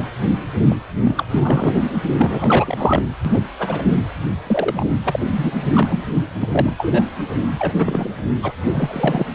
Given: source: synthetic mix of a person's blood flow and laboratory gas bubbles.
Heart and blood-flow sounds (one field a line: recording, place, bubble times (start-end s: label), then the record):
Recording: Doppler ultrasound of blood flow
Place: precordium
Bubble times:
0.00-0.03 s: bubbles
0.61-0.75 s: bubbles
1.01-1.23 s: bubbles
1.30-1.86 s: bubbles
2.17-3.03 s: bubbles
3.25-3.43 s: bubbles
3.58-3.87 s: bubbles
4.46-4.87 s: bubbles
5.04-5.20 s: bubbles
5.35-5.51 s: bubbles
5.72-6.05 s: bubbles
6.41-6.47 s: bubbles
6.51-7.04 s: bubbles
7.58-7.74 s: bubbles
7.78-8.09 s: bubbles
8.43-8.52 s: bubbles
8.62-9.27 s: bubbles
From the record:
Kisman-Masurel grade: 242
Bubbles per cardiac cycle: several, 3 to 8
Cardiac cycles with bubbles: 100%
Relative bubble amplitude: moderate (0.250 to 0.450)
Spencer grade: 3 (all of the cardiac periods contain showers or single bubble signals, but not dominating or overriding the cardiac motion signals)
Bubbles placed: anywhere in the cardiac cycle